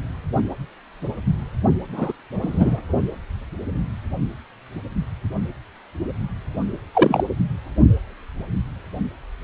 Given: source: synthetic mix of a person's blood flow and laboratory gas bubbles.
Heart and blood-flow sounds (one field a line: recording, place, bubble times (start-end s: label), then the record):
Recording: Doppler ultrasound of blood flow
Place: precordium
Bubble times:
1.92-2.12 s: bubbles
2.42-2.79 s: bubbles
6.93-7.24 s: bubbles
From the record:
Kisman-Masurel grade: 123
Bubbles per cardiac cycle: 1 to 2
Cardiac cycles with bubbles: 10 to 50%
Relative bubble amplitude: loud (0.450 to 0.775)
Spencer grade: 2 (many but less than half of the cardiac periods contain bubble signals, singularly or in groups)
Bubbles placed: only in the low amplitude regions of the cardiac cycle